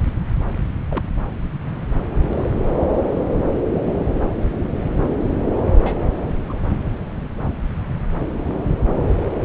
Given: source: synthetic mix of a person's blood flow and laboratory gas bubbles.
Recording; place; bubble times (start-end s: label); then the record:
Doppler ultrasound of blood flow; subclavian vein
0.90-1.04 s: bubbles
2.33-2.81 s: bubbles
5.79-5.93 s: bubbles
6.48-6.57 s: bubbles
From the record:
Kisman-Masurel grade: 121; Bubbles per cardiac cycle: 1 to 2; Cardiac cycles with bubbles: 10 to 50%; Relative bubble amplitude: barely perceptible (0.100 to 0.250); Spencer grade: 2 (many but less than half of the cardiac periods contain bubble signals, singularly or in groups); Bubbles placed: anywhere in the cardiac cycle